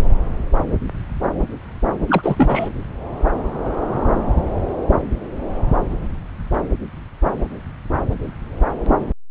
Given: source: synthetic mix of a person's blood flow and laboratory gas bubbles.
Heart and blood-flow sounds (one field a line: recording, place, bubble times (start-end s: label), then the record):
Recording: Doppler ultrasound of blood flow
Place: subclavian vein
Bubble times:
2.07-2.69 s: bubbles
From the record:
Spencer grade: 1 (occasional bubble signal discernible with the cardiac motion signal, with majority of cardiac periods free of bubbles)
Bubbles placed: anywhere in the cardiac cycle